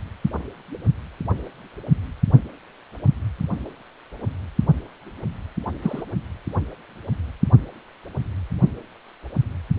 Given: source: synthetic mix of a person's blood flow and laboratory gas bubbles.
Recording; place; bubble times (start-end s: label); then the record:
Doppler ultrasound of blood flow; precordium
5.82-6.03 s: bubbles
From the record:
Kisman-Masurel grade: 112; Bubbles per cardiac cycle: 1 to 2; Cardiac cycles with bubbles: 1 to 10%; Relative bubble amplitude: moderate (0.250 to 0.450); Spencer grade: 1 (occasional bubble signal discernible with the cardiac motion signal, with majority of cardiac periods free of bubbles); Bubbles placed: only in the low amplitude regions of the cardiac cycle